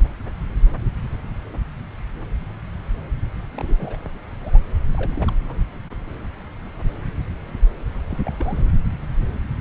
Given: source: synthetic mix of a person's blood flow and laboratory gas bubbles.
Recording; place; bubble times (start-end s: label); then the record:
Doppler ultrasound of blood flow; subclavian vein
3.55-3.74 s: bubbles
3.77-3.98 s: bubbles
4.02-4.09 s: bubbles
4.41-4.59 s: bubbles
4.95-5.34 s: bubbles
5.48-5.55 s: bubbles
8.08-8.18 s: bubbles
8.25-8.62 s: bubbles
From the record:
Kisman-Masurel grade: 221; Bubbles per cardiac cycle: several, 3 to 8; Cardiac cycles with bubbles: 10 to 50%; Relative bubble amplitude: barely perceptible (0.100 to 0.250); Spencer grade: 2 (many but less than half of the cardiac periods contain bubble signals, singularly or in groups); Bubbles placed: anywhere in the cardiac cycle